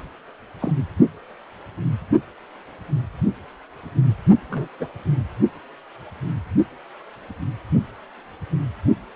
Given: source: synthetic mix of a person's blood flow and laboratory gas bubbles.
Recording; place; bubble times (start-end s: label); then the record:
Doppler ultrasound of blood flow; precordium
0.59-0.71 s: bubbles
4.50-4.68 s: bubbles
4.79-4.88 s: bubbles
From the record:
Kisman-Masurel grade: 121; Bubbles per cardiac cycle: 1 to 2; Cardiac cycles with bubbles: 10 to 50%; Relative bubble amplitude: barely perceptible (0.100 to 0.250); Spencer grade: 2 (many but less than half of the cardiac periods contain bubble signals, singularly or in groups); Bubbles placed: only in the low amplitude regions of the cardiac cycle